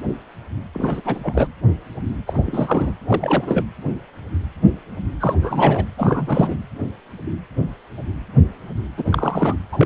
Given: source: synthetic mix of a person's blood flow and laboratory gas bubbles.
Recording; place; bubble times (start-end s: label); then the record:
Doppler ultrasound of blood flow; precordium
0.74-1.00 s: bubbles
1.04-1.21 s: bubbles
1.23-1.48 s: bubbles
2.27-2.93 s: bubbles
3.07-3.65 s: bubbles
5.20-5.35 s: bubbles
5.42-5.85 s: bubbles
5.98-6.57 s: bubbles
8.97-9.55 s: bubbles
9.72-9.86 s: bubbles
From the record:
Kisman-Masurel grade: 332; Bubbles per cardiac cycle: rolling drumbeat, 9 or more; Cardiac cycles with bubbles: 50 to 99%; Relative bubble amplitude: moderate (0.250 to 0.450); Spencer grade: 3 (all of the cardiac periods contain showers or single bubble signals, but not dominating or overriding the cardiac motion signals); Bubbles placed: anywhere in the cardiac cycle